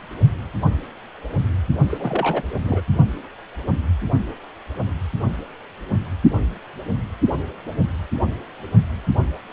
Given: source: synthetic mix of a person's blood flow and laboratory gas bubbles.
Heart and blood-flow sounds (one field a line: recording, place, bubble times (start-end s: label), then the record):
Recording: Doppler ultrasound of blood flow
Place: precordium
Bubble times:
1.89-2.43 s: bubbles
2.62-2.81 s: bubbles
From the record:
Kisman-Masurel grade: 212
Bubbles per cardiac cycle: several, 3 to 8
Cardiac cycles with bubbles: 1 to 10%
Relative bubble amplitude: moderate (0.250 to 0.450)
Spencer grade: 1 (occasional bubble signal discernible with the cardiac motion signal, with majority of cardiac periods free of bubbles)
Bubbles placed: only in the low amplitude regions of the cardiac cycle